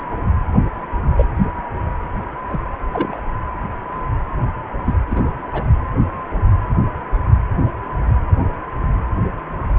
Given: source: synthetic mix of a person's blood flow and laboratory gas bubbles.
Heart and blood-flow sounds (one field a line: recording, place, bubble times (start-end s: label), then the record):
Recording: Doppler ultrasound of blood flow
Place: precordium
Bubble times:
1.17-1.25 s: bubbles
2.48-2.60 s: bubbles
2.93-3.21 s: bubbles
4.86-4.94 s: bubbles
5.10-5.22 s: bubbles
5.47-5.66 s: bubbles
From the record:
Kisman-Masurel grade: 122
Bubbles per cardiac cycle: 1 to 2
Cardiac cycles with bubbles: 10 to 50%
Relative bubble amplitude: moderate (0.250 to 0.450)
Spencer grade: 2 (many but less than half of the cardiac periods contain bubble signals, singularly or in groups)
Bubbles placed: anywhere in the cardiac cycle